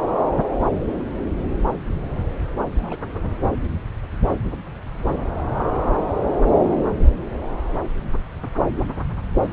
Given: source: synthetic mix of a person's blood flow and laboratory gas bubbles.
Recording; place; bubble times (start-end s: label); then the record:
Doppler ultrasound of blood flow; subclavian vein
2.72-2.97 s: bubbles
From the record:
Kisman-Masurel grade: 211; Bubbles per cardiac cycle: several, 3 to 8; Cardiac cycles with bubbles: 1 to 10%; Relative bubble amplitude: barely perceptible (0.100 to 0.250); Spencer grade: 1 (occasional bubble signal discernible with the cardiac motion signal, with majority of cardiac periods free of bubbles); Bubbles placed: anywhere in the cardiac cycle